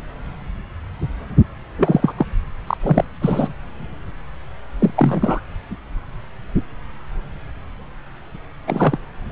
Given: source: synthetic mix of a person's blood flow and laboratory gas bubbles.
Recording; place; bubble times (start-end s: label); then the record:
Doppler ultrasound of blood flow; subclavian vein
1.78-2.13 s: bubbles
2.17-2.26 s: bubbles
2.67-2.77 s: bubbles
2.82-3.04 s: bubbles
3.21-3.53 s: bubbles
4.79-4.91 s: bubbles
4.96-5.40 s: bubbles
8.67-8.97 s: bubbles
9.30-9.32 s: bubbles
From the record:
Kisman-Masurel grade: 233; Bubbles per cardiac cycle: several, 3 to 8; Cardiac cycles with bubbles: 50 to 99%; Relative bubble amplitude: loud (0.450 to 0.775); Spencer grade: 3 (all of the cardiac periods contain showers or single bubble signals, but not dominating or overriding the cardiac motion signals); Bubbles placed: anywhere in the cardiac cycle